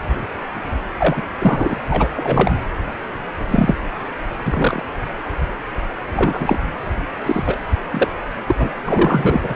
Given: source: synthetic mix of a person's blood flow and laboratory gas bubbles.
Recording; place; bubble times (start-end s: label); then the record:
Doppler ultrasound of blood flow; precordium
0.98-1.22 s: bubbles
1.38-1.74 s: bubbles
1.90-2.09 s: bubbles
2.15-2.51 s: bubbles
3.48-3.75 s: bubbles
4.46-4.85 s: bubbles
6.11-6.59 s: bubbles
7.25-7.57 s: bubbles
7.91-8.12 s: bubbles
8.48-8.70 s: bubbles
8.86-9.54 s: bubbles
From the record:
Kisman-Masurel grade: 233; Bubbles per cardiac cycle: several, 3 to 8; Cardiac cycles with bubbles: 50 to 99%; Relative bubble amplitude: loud (0.450 to 0.775); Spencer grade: 3 (all of the cardiac periods contain showers or single bubble signals, but not dominating or overriding the cardiac motion signals); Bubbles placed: anywhere in the cardiac cycle